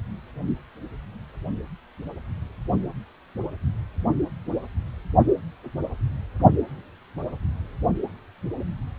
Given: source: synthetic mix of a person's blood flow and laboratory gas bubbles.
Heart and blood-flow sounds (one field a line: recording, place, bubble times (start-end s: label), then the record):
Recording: Doppler ultrasound of blood flow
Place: precordium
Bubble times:
no bubbles
From the record:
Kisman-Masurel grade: 000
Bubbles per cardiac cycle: 0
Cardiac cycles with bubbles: 0%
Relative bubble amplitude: no bubbles discernible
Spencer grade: 0 (complete lack of bubble signals)